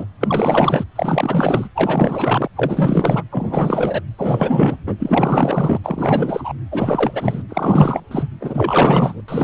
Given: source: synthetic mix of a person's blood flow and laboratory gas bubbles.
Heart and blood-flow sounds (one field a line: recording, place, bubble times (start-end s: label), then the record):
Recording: Doppler ultrasound of blood flow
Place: precordium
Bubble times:
0.00-0.05 s: bubbles
0.20-0.84 s: bubbles
0.95-1.69 s: bubbles
1.75-2.48 s: bubbles
2.55-3.23 s: bubbles
3.31-4.01 s: bubbles
4.17-4.76 s: bubbles
4.87-4.96 s: bubbles
4.99-5.81 s: bubbles
5.83-6.54 s: bubbles
6.71-7.43 s: bubbles
7.49-8.01 s: bubbles
8.11-8.28 s: bubbles
8.41-9.21 s: bubbles
9.28-9.44 s: bubbles
From the record:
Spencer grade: 4 (maximum detectable bubble signal sounding continuously throughout systole and diastole of every cardiac period, and overriding the amplitude of the normal cardiac signals)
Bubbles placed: anywhere in the cardiac cycle